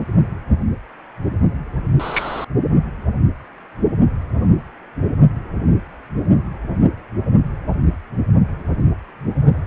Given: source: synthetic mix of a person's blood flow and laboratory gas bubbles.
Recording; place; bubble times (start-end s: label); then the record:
Doppler ultrasound of blood flow; precordium
1.99-2.45 s: bubbles
From the record:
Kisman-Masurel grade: 123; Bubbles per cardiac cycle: 1 to 2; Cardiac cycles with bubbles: 10 to 50%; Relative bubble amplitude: loud (0.450 to 0.775); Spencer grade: 2 (many but less than half of the cardiac periods contain bubble signals, singularly or in groups); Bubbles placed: only in the low amplitude regions of the cardiac cycle